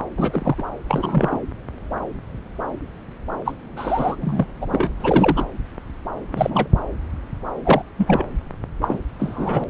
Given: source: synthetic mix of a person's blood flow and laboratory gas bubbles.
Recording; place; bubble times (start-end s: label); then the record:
Doppler ultrasound of blood flow; subclavian vein
0.17-0.55 s: bubbles
0.58-0.63 s: bubbles
0.89-1.38 s: bubbles
3.45-3.54 s: bubbles
3.77-4.17 s: bubbles
4.21-4.45 s: bubbles
4.61-4.89 s: bubbles
5.00-5.46 s: bubbles
6.32-6.69 s: bubbles
7.64-7.83 s: bubbles
7.98-8.24 s: bubbles
8.82-8.99 s: bubbles
9.19-9.64 s: bubbles
From the record:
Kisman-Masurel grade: 232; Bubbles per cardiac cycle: several, 3 to 8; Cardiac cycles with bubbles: 50 to 99%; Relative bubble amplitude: moderate (0.250 to 0.450); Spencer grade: 3 (all of the cardiac periods contain showers or single bubble signals, but not dominating or overriding the cardiac motion signals); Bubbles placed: anywhere in the cardiac cycle